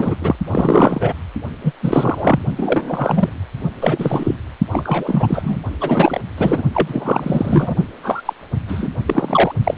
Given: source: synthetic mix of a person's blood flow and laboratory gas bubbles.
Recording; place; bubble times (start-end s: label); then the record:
Doppler ultrasound of blood flow; precordium
0.00-0.15 s: bubbles
0.21-0.35 s: bubbles
0.46-1.13 s: bubbles
1.64-1.73 s: bubbles
1.82-2.40 s: bubbles
2.56-3.29 s: bubbles
3.75-4.33 s: bubbles
4.70-5.57 s: bubbles
5.80-6.20 s: bubbles
6.37-6.62 s: bubbles
6.74-7.75 s: bubbles
8.03-8.22 s: bubbles
8.25-8.33 s: bubbles
8.51-8.58 s: bubbles
8.67-8.88 s: bubbles
9.06-9.53 s: bubbles
9.63-9.77 s: bubbles
From the record:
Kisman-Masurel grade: 343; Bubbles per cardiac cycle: rolling drumbeat, 9 or more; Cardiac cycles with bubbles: 100%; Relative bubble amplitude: loud (0.450 to 0.775); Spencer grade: 3 (all of the cardiac periods contain showers or single bubble signals, but not dominating or overriding the cardiac motion signals); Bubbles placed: only in the low amplitude regions of the cardiac cycle